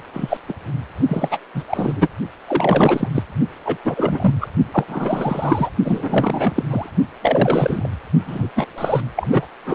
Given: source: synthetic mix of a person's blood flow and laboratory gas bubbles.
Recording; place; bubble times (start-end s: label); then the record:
Doppler ultrasound of blood flow; precordium
0.13-0.37 s: bubbles
0.48-0.54 s: bubbles
1.07-1.39 s: bubbles
1.54-1.63 s: bubbles
1.69-1.93 s: bubbles
1.96-2.08 s: bubbles
2.47-3.09 s: bubbles
3.15-3.23 s: bubbles
3.65-3.78 s: bubbles
3.84-4.36 s: bubbles
4.41-4.49 s: bubbles
4.71-4.84 s: bubbles
4.88-5.70 s: bubbles
5.84-6.63 s: bubbles
6.70-6.90 s: bubbles
7.22-7.88 s: bubbles
8.27-8.50 s: bubbles
8.55-8.66 s: bubbles
8.78-9.01 s: bubbles
9.15-9.46 s: bubbles
9.66-9.75 s: bubbles
From the record:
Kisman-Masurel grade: 343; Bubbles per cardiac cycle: rolling drumbeat, 9 or more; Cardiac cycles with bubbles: 100%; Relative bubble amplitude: loud (0.450 to 0.775); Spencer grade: 3 (all of the cardiac periods contain showers or single bubble signals, but not dominating or overriding the cardiac motion signals); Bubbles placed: only in the low amplitude regions of the cardiac cycle